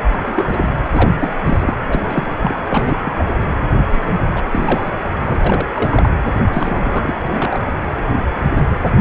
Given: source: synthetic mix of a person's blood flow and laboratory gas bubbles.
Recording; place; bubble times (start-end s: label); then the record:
Doppler ultrasound of blood flow; precordium
0.11-0.71 s: bubbles
0.91-1.10 s: bubbles
1.19-1.73 s: bubbles
1.85-2.31 s: bubbles
2.39-2.55 s: bubbles
2.70-2.98 s: bubbles
3.04-3.11 s: bubbles
3.17-3.25 s: bubbles
3.93-4.16 s: bubbles
4.21-4.43 s: bubbles
4.52-4.91 s: bubbles
5.24-5.39 s: bubbles
5.45-5.68 s: bubbles
5.73-6.15 s: bubbles
6.53-7.14 s: bubbles
7.23-7.60 s: bubbles
From the record:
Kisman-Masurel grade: 232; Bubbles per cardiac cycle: several, 3 to 8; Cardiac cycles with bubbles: 50 to 99%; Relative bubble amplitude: moderate (0.250 to 0.450); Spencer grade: 3 (all of the cardiac periods contain showers or single bubble signals, but not dominating or overriding the cardiac motion signals); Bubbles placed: anywhere in the cardiac cycle